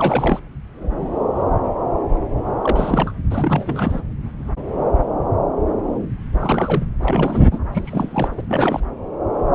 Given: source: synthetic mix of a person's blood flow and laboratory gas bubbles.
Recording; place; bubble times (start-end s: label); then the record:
Doppler ultrasound of blood flow; subclavian vein
0.00-0.40 s: bubbles
2.62-3.12 s: bubbles
3.30-4.02 s: bubbles
6.40-6.83 s: bubbles
7.01-7.48 s: bubbles
7.51-7.59 s: bubbles
7.73-8.41 s: bubbles
8.47-8.96 s: bubbles
From the record:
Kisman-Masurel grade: 332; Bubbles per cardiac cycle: rolling drumbeat, 9 or more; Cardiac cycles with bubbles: 50 to 99%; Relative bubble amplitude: moderate (0.250 to 0.450); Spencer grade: 3 (all of the cardiac periods contain showers or single bubble signals, but not dominating or overriding the cardiac motion signals); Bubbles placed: anywhere in the cardiac cycle